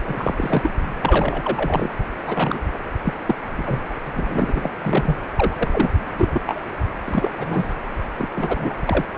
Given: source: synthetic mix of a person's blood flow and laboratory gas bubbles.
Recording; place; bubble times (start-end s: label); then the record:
Doppler ultrasound of blood flow; precordium
0.05-0.34 s: bubbles
0.38-0.71 s: bubbles
1.02-1.90 s: bubbles
2.26-2.60 s: bubbles
2.72-2.79 s: bubbles
3.04-3.13 s: bubbles
3.25-3.35 s: bubbles
3.58-3.62 s: bubbles
3.65-3.80 s: bubbles
4.13-4.71 s: bubbles
4.78-5.17 s: bubbles
5.35-5.55 s: bubbles
5.59-5.68 s: bubbles
5.71-5.89 s: bubbles
6.13-6.42 s: bubbles
6.46-6.63 s: bubbles
7.06-7.30 s: bubbles
7.37-7.73 s: bubbles
8.19-8.27 s: bubbles
8.36-8.73 s: bubbles
8.86-9.04 s: bubbles
From the record:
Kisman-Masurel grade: 242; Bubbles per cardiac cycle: several, 3 to 8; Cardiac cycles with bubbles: 100%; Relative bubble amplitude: moderate (0.250 to 0.450); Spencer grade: 3 (all of the cardiac periods contain showers or single bubble signals, but not dominating or overriding the cardiac motion signals); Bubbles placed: anywhere in the cardiac cycle